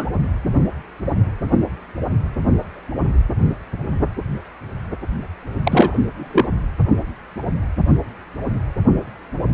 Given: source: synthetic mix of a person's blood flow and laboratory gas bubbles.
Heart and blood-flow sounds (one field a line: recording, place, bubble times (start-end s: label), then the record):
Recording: Doppler ultrasound of blood flow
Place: precordium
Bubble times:
0.00-0.06 s: bubbles
5.63-5.99 s: bubbles
6.17-6.47 s: bubbles
From the record:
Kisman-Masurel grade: 223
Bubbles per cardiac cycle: several, 3 to 8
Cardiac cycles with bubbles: 10 to 50%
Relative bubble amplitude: loud (0.450 to 0.775)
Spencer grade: 2 (many but less than half of the cardiac periods contain bubble signals, singularly or in groups)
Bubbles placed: only in the low amplitude regions of the cardiac cycle